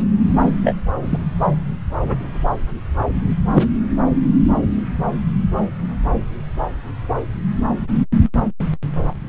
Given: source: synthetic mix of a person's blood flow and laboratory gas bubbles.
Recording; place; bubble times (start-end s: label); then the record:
Doppler ultrasound of blood flow; subclavian vein
0.65-0.75 s: bubbles
1.02-1.18 s: bubbles
2.02-2.21 s: bubbles
3.52-3.67 s: bubbles
From the record:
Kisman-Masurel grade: 123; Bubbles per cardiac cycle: 1 to 2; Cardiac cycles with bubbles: 10 to 50%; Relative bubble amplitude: loud (0.450 to 0.775); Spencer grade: 2 (many but less than half of the cardiac periods contain bubble signals, singularly or in groups); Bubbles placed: anywhere in the cardiac cycle